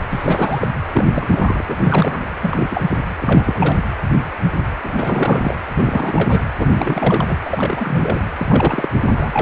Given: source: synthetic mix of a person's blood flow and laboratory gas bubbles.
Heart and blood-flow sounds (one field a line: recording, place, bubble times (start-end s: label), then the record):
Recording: Doppler ultrasound of blood flow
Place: precordium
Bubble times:
0.10-0.68 s: bubbles
0.92-1.05 s: bubbles
1.11-2.30 s: bubbles
2.42-2.67 s: bubbles
2.71-2.84 s: bubbles
2.90-2.97 s: bubbles
3.21-3.76 s: bubbles
4.83-5.56 s: bubbles
5.75-6.42 s: bubbles
6.59-6.68 s: bubbles
6.75-7.38 s: bubbles
7.45-8.28 s: bubbles
8.38-8.88 s: bubbles
8.98-9.42 s: bubbles
From the record:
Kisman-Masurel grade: 332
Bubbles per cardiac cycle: rolling drumbeat, 9 or more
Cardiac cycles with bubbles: 50 to 99%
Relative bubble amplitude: moderate (0.250 to 0.450)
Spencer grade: 3 (all of the cardiac periods contain showers or single bubble signals, but not dominating or overriding the cardiac motion signals)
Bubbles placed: anywhere in the cardiac cycle